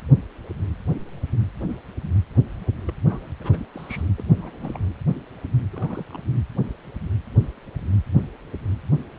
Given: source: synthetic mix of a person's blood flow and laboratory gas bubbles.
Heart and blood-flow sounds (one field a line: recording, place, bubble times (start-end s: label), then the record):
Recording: Doppler ultrasound of blood flow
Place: precordium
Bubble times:
2.87-2.94 s: bubbles
3.09-3.27 s: bubbles
3.40-3.66 s: bubbles
3.73-4.02 s: bubbles
4.18-4.23 s: bubbles
4.40-4.79 s: bubbles
5.72-6.05 s: bubbles
6.08-6.20 s: bubbles
From the record:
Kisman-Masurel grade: 221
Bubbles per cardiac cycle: several, 3 to 8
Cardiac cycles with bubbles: 10 to 50%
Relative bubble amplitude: barely perceptible (0.100 to 0.250)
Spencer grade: 2 (many but less than half of the cardiac periods contain bubble signals, singularly or in groups)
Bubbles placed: anywhere in the cardiac cycle